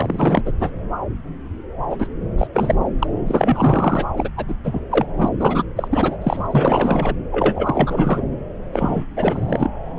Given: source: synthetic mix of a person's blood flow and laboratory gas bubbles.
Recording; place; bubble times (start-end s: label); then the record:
Doppler ultrasound of blood flow; subclavian vein
0.00-0.41 s: bubbles
0.45-0.53 s: bubbles
0.59-0.70 s: bubbles
1.90-2.07 s: bubbles
2.38-2.47 s: bubbles
2.54-2.75 s: bubbles
2.98-3.07 s: bubbles
3.27-4.07 s: bubbles
4.17-4.29 s: bubbles
4.37-4.45 s: bubbles
4.48-4.55 s: bubbles
4.63-4.80 s: bubbles
4.91-5.05 s: bubbles
5.18-5.29 s: bubbles
5.39-5.63 s: bubbles
5.76-5.88 s: bubbles
5.91-6.17 s: bubbles
6.21-6.47 s: bubbles
6.50-7.15 s: bubbles
7.32-8.21 s: bubbles
8.72-9.04 s: bubbles
9.16-9.71 s: bubbles
9.96-9.99 s: bubbles
From the record:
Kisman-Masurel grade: 333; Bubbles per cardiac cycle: rolling drumbeat, 9 or more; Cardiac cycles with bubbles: 50 to 99%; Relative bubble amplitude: loud (0.450 to 0.775); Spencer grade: 3 (all of the cardiac periods contain showers or single bubble signals, but not dominating or overriding the cardiac motion signals); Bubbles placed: anywhere in the cardiac cycle